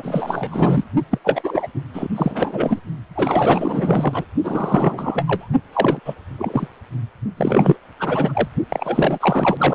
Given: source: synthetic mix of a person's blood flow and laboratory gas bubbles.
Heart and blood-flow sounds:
Doppler ultrasound of blood flow; precordium
0.00-0.85 s: bubbles
1.10-1.19 s: bubbles
1.24-1.68 s: bubbles
1.74-1.82 s: bubbles
1.94-2.08 s: bubbles
2.15-2.79 s: bubbles
3.15-4.25 s: bubbles
4.43-5.48 s: bubbles
5.73-6.00 s: bubbles
6.05-6.15 s: bubbles
6.38-6.67 s: bubbles
7.37-7.78 s: bubbles
7.99-8.48 s: bubbles
8.69-9.75 s: bubbles
From the record:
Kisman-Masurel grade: 444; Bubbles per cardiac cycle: continuous sound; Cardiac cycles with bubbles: 100%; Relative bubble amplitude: maximal (0.775 to 0.999); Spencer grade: 4 (maximum detectable bubble signal sounding continuously throughout systole and diastole of every cardiac period, and overriding the amplitude of the normal cardiac signals); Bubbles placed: only in the low amplitude regions of the cardiac cycle

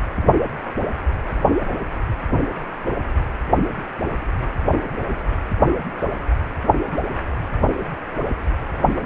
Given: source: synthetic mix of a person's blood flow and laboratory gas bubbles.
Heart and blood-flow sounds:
Doppler ultrasound of blood flow; precordium
no bubbles
From the record:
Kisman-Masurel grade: 000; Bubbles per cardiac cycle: 0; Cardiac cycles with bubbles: 0%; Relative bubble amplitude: no bubbles discernible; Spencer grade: 0 (complete lack of bubble signals)

